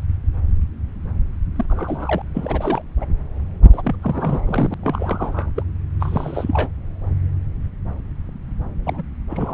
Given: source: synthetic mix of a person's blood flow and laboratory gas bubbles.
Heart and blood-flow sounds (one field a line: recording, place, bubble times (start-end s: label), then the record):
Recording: Doppler ultrasound of blood flow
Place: subclavian vein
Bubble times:
1.56-1.65 s: bubbles
1.69-2.22 s: bubbles
2.33-2.82 s: bubbles
3.00-3.05 s: bubbles
3.72-3.96 s: bubbles
4.02-4.74 s: bubbles
4.83-5.50 s: bubbles
5.55-5.63 s: bubbles
6.00-6.70 s: bubbles
8.86-9.03 s: bubbles
9.29-9.54 s: bubbles
From the record:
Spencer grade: 3 (all of the cardiac periods contain showers or single bubble signals, but not dominating or overriding the cardiac motion signals)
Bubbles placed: anywhere in the cardiac cycle